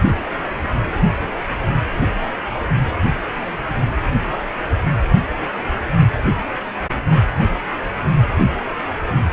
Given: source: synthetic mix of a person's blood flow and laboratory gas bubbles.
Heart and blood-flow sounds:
Doppler ultrasound of blood flow; precordium
no bubbles
From the record:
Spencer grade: 0 (complete lack of bubble signals)

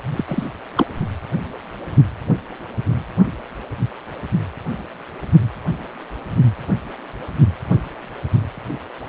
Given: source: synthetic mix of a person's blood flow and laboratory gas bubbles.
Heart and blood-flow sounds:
Doppler ultrasound of blood flow; precordium
0.11-0.24 s: bubbles
0.28-0.47 s: bubbles
0.76-0.86 s: bubbles
From the record:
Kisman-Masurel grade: 212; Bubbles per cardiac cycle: several, 3 to 8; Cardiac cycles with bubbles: 1 to 10%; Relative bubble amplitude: moderate (0.250 to 0.450); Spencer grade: 1 (occasional bubble signal discernible with the cardiac motion signal, with majority of cardiac periods free of bubbles); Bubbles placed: only in the low amplitude regions of the cardiac cycle

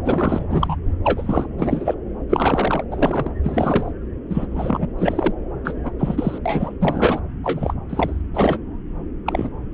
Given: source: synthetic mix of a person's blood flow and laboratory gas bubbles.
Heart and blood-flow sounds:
Doppler ultrasound of blood flow; subclavian vein
0.04-0.45 s: bubbles
0.49-0.76 s: bubbles
1.04-1.47 s: bubbles
1.57-1.95 s: bubbles
2.29-2.84 s: bubbles
2.91-3.31 s: bubbles
3.43-3.92 s: bubbles
4.30-4.46 s: bubbles
4.51-4.87 s: bubbles
4.98-5.33 s: bubbles
5.65-5.92 s: bubbles
5.99-6.39 s: bubbles
6.46-6.73 s: bubbles
6.81-7.20 s: bubbles
7.44-7.74 s: bubbles
7.90-8.22 s: bubbles
8.35-8.58 s: bubbles
9.26-9.50 s: bubbles
From the record:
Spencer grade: 3 (all of the cardiac periods contain showers or single bubble signals, but not dominating or overriding the cardiac motion signals); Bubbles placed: anywhere in the cardiac cycle

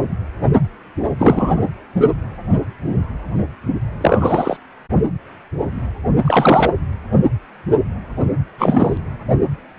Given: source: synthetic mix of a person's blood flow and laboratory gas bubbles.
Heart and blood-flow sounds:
Doppler ultrasound of blood flow; precordium
1.19-1.64 s: bubbles
4.00-4.57 s: bubbles
6.25-6.73 s: bubbles
8.58-8.98 s: bubbles
From the record:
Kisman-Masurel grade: 223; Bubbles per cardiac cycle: several, 3 to 8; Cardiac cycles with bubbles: 10 to 50%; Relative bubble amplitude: loud (0.450 to 0.775); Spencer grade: 2 (many but less than half of the cardiac periods contain bubble signals, singularly or in groups); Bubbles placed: anywhere in the cardiac cycle

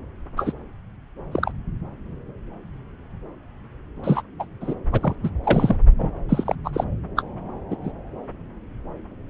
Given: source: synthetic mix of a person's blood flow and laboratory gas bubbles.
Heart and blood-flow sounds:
Doppler ultrasound of blood flow; subclavian vein
0.36-0.53 s: bubbles
1.31-1.52 s: bubbles
4.03-4.22 s: bubbles
4.39-4.45 s: bubbles
4.60-4.74 s: bubbles
4.92-5.14 s: bubbles
5.23-5.29 s: bubbles
5.43-5.75 s: bubbles
5.98-6.11 s: bubbles
6.28-6.55 s: bubbles
6.64-6.70 s: bubbles
6.73-6.84 s: bubbles
7.16-7.23 s: bubbles
7.70-7.76 s: bubbles
7.83-7.91 s: bubbles
From the record:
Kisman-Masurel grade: 232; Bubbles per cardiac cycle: several, 3 to 8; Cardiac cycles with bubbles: 50 to 99%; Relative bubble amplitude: moderate (0.250 to 0.450); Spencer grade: 3 (all of the cardiac periods contain showers or single bubble signals, but not dominating or overriding the cardiac motion signals); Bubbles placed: anywhere in the cardiac cycle

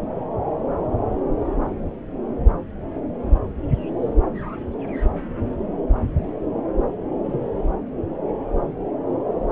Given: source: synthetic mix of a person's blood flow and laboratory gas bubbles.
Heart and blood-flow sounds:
Doppler ultrasound of blood flow; subclavian vein
7.24-7.38 s: bubbles
From the record:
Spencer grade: 2 (many but less than half of the cardiac periods contain bubble signals, singularly or in groups); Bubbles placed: anywhere in the cardiac cycle

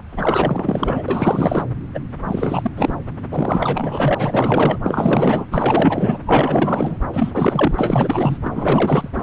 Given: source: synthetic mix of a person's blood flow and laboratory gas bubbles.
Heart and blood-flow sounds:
Doppler ultrasound of blood flow; subclavian vein
0.11-1.65 s: bubbles
1.94-1.99 s: bubbles
2.27-2.71 s: bubbles
2.76-2.94 s: bubbles
3.30-4.14 s: bubbles
4.18-4.79 s: bubbles
4.83-5.45 s: bubbles
5.50-6.18 s: bubbles
6.26-6.97 s: bubbles
7.13-8.38 s: bubbles
8.42-9.09 s: bubbles
9.14-9.22 s: bubbles
From the record:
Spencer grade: 4 (maximum detectable bubble signal sounding continuously throughout systole and diastole of every cardiac period, and overriding the amplitude of the normal cardiac signals); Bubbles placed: anywhere in the cardiac cycle

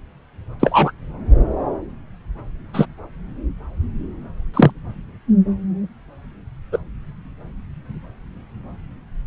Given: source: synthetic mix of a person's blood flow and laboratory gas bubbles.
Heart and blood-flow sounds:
Doppler ultrasound of blood flow; subclavian vein
0.59-0.92 s: bubbles
2.73-2.86 s: bubbles
4.53-4.71 s: bubbles
6.72-6.78 s: bubbles
From the record:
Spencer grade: 2 (many but less than half of the cardiac periods contain bubble signals, singularly or in groups); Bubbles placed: anywhere in the cardiac cycle

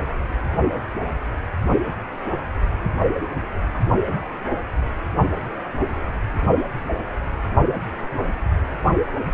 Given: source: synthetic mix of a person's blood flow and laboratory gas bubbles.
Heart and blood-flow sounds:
Doppler ultrasound of blood flow; precordium
no bubbles
From the record:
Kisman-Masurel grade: 000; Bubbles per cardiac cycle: 0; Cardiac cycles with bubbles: 0%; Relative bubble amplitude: no bubbles discernible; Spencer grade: 0 (complete lack of bubble signals)

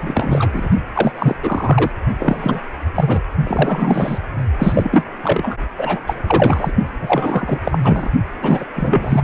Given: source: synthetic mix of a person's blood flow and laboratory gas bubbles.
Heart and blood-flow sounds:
Doppler ultrasound of blood flow; precordium
0.00-0.69 s: bubbles
0.95-1.12 s: bubbles
1.15-1.35 s: bubbles
1.43-1.91 s: bubbles
2.18-2.60 s: bubbles
2.94-3.21 s: bubbles
3.44-4.18 s: bubbles
4.58-5.05 s: bubbles
5.22-5.57 s: bubbles
5.78-6.00 s: bubbles
6.07-6.72 s: bubbles
7.00-7.58 s: bubbles
7.63-7.78 s: bubbles
7.83-8.11 s: bubbles
8.42-8.67 s: bubbles
8.75-9.22 s: bubbles
From the record:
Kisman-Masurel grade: 343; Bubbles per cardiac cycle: rolling drumbeat, 9 or more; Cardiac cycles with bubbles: 100%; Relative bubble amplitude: loud (0.450 to 0.775); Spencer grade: 3 (all of the cardiac periods contain showers or single bubble signals, but not dominating or overriding the cardiac motion signals); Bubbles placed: only in the low amplitude regions of the cardiac cycle

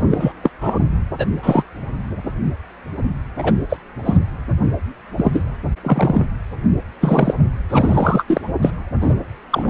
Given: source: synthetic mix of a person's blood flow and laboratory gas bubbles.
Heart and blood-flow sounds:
Doppler ultrasound of blood flow; precordium
0.09-0.33 s: bubbles
0.43-0.50 s: bubbles
0.61-0.78 s: bubbles
1.18-1.26 s: bubbles
1.42-1.64 s: bubbles
3.38-3.54 s: bubbles
3.69-3.77 s: bubbles
4.05-4.17 s: bubbles
5.17-5.43 s: bubbles
5.83-6.25 s: bubbles
7.00-7.34 s: bubbles
7.69-8.41 s: bubbles
8.62-8.71 s: bubbles
9.01-9.15 s: bubbles
9.51-9.69 s: bubbles
From the record:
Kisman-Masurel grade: 233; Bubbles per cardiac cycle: several, 3 to 8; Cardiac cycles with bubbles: 50 to 99%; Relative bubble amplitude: loud (0.450 to 0.775); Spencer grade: 3 (all of the cardiac periods contain showers or single bubble signals, but not dominating or overriding the cardiac motion signals); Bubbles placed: anywhere in the cardiac cycle

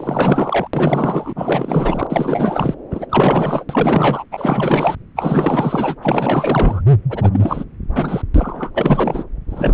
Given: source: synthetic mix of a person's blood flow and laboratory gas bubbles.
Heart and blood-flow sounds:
Doppler ultrasound of blood flow; subclavian vein
0.00-0.68 s: bubbles
0.73-1.33 s: bubbles
1.35-2.07 s: bubbles
2.10-2.75 s: bubbles
2.90-3.06 s: bubbles
3.09-3.65 s: bubbles
3.69-4.25 s: bubbles
4.31-4.96 s: bubbles
5.15-5.96 s: bubbles
6.01-6.82 s: bubbles
7.09-7.29 s: bubbles
7.32-7.64 s: bubbles
7.89-8.22 s: bubbles
8.34-8.71 s: bubbles
8.74-9.23 s: bubbles
9.49-9.74 s: bubbles
From the record:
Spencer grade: 4 (maximum detectable bubble signal sounding continuously throughout systole and diastole of every cardiac period, and overriding the amplitude of the normal cardiac signals); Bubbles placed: anywhere in the cardiac cycle

